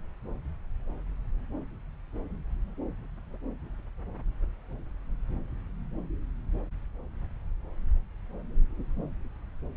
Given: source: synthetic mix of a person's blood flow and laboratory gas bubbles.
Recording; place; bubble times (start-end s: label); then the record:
Doppler ultrasound of blood flow; subclavian vein
no bubbles
From the record:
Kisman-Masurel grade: 000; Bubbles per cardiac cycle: 0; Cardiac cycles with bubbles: 0%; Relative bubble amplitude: no bubbles discernible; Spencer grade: 0 (complete lack of bubble signals)